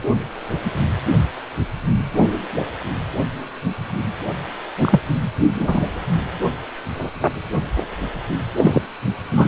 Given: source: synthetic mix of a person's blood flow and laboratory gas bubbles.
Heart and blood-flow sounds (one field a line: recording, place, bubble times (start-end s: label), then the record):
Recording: Doppler ultrasound of blood flow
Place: precordium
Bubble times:
4.78-5.00 s: bubbles
5.58-5.86 s: bubbles
8.57-8.80 s: bubbles
9.31-9.48 s: bubbles
From the record:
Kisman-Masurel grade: 123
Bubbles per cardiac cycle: 1 to 2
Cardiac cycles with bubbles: 10 to 50%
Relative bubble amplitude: loud (0.450 to 0.775)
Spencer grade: 2 (many but less than half of the cardiac periods contain bubble signals, singularly or in groups)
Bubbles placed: anywhere in the cardiac cycle